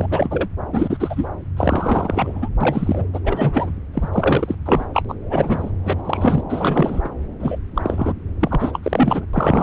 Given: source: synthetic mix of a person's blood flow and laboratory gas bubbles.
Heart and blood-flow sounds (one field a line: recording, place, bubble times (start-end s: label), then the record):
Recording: Doppler ultrasound of blood flow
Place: subclavian vein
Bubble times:
0.00-0.49 s: bubbles
0.72-1.28 s: bubbles
1.56-2.49 s: bubbles
2.60-3.04 s: bubbles
3.13-3.20 s: bubbles
3.24-3.71 s: bubbles
3.94-4.09 s: bubbles
4.11-4.55 s: bubbles
4.65-4.85 s: bubbles
4.93-5.02 s: bubbles
5.08-5.15 s: bubbles
5.29-5.70 s: bubbles
5.84-6.02 s: bubbles
6.04-6.44 s: bubbles
6.49-7.09 s: bubbles
7.40-7.59 s: bubbles
7.75-8.13 s: bubbles
8.40-8.79 s: bubbles
8.83-9.26 s: bubbles
9.33-9.63 s: bubbles
From the record:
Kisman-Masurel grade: 343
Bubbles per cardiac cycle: rolling drumbeat, 9 or more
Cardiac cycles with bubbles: 100%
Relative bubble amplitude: loud (0.450 to 0.775)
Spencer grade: 3 (all of the cardiac periods contain showers or single bubble signals, but not dominating or overriding the cardiac motion signals)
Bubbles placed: anywhere in the cardiac cycle